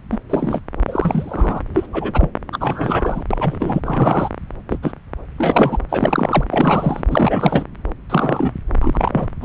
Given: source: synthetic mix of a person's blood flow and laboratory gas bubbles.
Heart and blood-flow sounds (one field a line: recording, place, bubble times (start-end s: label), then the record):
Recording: Doppler ultrasound of blood flow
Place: subclavian vein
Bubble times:
0.11-0.18 s: bubbles
0.29-0.60 s: bubbles
0.88-1.61 s: bubbles
1.74-1.87 s: bubbles
1.92-2.31 s: bubbles
2.52-3.23 s: bubbles
3.31-3.80 s: bubbles
3.84-4.29 s: bubbles
4.70-4.78 s: bubbles
4.82-4.92 s: bubbles
5.38-5.78 s: bubbles
5.89-6.44 s: bubbles
6.50-7.03 s: bubbles
7.10-7.65 s: bubbles
8.09-8.53 s: bubbles
8.80-9.26 s: bubbles
9.41-9.44 s: bubbles
From the record:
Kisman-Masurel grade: 243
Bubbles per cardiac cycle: several, 3 to 8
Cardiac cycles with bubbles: 100%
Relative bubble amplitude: loud (0.450 to 0.775)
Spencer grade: 3 (all of the cardiac periods contain showers or single bubble signals, but not dominating or overriding the cardiac motion signals)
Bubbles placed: anywhere in the cardiac cycle